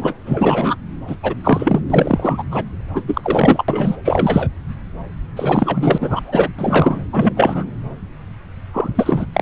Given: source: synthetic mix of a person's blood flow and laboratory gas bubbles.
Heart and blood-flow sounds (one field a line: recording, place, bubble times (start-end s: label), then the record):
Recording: Doppler ultrasound of blood flow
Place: subclavian vein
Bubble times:
0.00-0.15 s: bubbles
0.25-0.76 s: bubbles
1.07-1.16 s: bubbles
1.23-1.34 s: bubbles
1.44-1.80 s: bubbles
1.90-2.44 s: bubbles
2.51-2.63 s: bubbles
2.93-3.02 s: bubbles
3.07-3.21 s: bubbles
3.23-3.63 s: bubbles
3.68-3.95 s: bubbles
4.04-4.50 s: bubbles
5.36-5.98 s: bubbles
6.01-6.50 s: bubbles
6.58-7.01 s: bubbles
7.12-7.33 s: bubbles
7.37-7.64 s: bubbles
8.74-8.89 s: bubbles
8.95-9.26 s: bubbles
9.33-9.42 s: bubbles
From the record:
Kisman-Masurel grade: 333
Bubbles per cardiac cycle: rolling drumbeat, 9 or more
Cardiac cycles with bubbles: 50 to 99%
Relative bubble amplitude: loud (0.450 to 0.775)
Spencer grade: 3 (all of the cardiac periods contain showers or single bubble signals, but not dominating or overriding the cardiac motion signals)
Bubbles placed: anywhere in the cardiac cycle